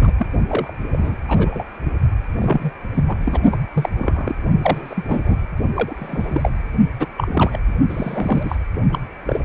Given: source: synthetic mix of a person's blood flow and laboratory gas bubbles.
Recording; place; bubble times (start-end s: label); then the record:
Doppler ultrasound of blood flow; precordium
0.01-0.11 s: bubbles
0.18-0.26 s: bubbles
0.47-0.73 s: bubbles
0.90-1.17 s: bubbles
1.27-1.65 s: bubbles
2.37-2.71 s: bubbles
2.94-3.04 s: bubbles
3.08-3.17 s: bubbles
3.21-3.40 s: bubbles
3.52-3.56 s: bubbles
3.73-3.90 s: bubbles
3.98-4.35 s: bubbles
4.61-5.04 s: bubbles
5.07-5.38 s: bubbles
5.74-6.50 s: bubbles
6.99-7.06 s: bubbles
7.17-7.59 s: bubbles
7.89-8.56 s: bubbles
8.92-8.99 s: bubbles
9.26-9.40 s: bubbles
9.43-9.45 s: bubbles
From the record:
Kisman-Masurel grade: 242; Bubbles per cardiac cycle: several, 3 to 8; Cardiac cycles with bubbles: 100%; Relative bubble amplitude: moderate (0.250 to 0.450); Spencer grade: 3 (all of the cardiac periods contain showers or single bubble signals, but not dominating or overriding the cardiac motion signals); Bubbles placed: only in the low amplitude regions of the cardiac cycle